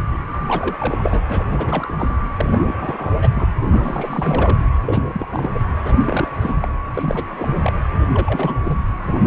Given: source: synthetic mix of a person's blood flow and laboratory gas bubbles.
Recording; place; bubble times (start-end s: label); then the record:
Doppler ultrasound of blood flow; precordium
0.00-0.04 s: bubbles
0.32-0.45 s: bubbles
0.47-0.75 s: bubbles
0.80-1.21 s: bubbles
1.28-1.44 s: bubbles
1.51-1.93 s: bubbles
1.99-2.16 s: bubbles
2.38-3.28 s: bubbles
3.35-3.49 s: bubbles
3.70-4.58 s: bubbles
4.80-5.07 s: bubbles
5.13-5.26 s: bubbles
5.30-5.50 s: bubbles
5.54-5.64 s: bubbles
5.84-6.29 s: bubbles
6.41-6.68 s: bubbles
6.94-7.25 s: bubbles
7.29-7.73 s: bubbles
7.91-8.00 s: bubbles
8.14-8.56 s: bubbles
8.65-8.78 s: bubbles
9.03-9.12 s: bubbles
9.22-9.26 s: bubbles
From the record:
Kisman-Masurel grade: 342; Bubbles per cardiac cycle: rolling drumbeat, 9 or more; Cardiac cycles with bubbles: 100%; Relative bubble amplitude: moderate (0.250 to 0.450); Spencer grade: 3 (all of the cardiac periods contain showers or single bubble signals, but not dominating or overriding the cardiac motion signals); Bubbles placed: anywhere in the cardiac cycle